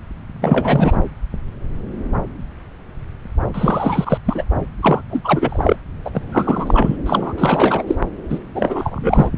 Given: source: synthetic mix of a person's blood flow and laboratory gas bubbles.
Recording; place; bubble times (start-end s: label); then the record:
Doppler ultrasound of blood flow; subclavian vein
0.41-0.98 s: bubbles
3.54-4.18 s: bubbles
4.25-4.44 s: bubbles
4.82-5.02 s: bubbles
5.10-5.21 s: bubbles
5.24-5.76 s: bubbles
6.05-6.10 s: bubbles
6.14-6.21 s: bubbles
6.31-6.96 s: bubbles
7.05-7.33 s: bubbles
7.38-7.83 s: bubbles
7.87-7.96 s: bubbles
8.29-8.39 s: bubbles
8.54-9.29 s: bubbles
From the record:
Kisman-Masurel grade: 333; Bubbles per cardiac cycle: rolling drumbeat, 9 or more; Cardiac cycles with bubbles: 50 to 99%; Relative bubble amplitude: loud (0.450 to 0.775); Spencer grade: 3 (all of the cardiac periods contain showers or single bubble signals, but not dominating or overriding the cardiac motion signals); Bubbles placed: anywhere in the cardiac cycle